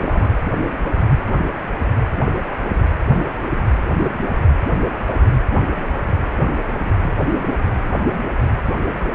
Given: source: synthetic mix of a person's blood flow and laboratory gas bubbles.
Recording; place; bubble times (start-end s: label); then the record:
Doppler ultrasound of blood flow; precordium
0.00-0.36 s: bubbles
From the record:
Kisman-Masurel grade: 211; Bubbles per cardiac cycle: several, 3 to 8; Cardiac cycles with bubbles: 1 to 10%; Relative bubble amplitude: barely perceptible (0.100 to 0.250); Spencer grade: 1 (occasional bubble signal discernible with the cardiac motion signal, with majority of cardiac periods free of bubbles); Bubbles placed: anywhere in the cardiac cycle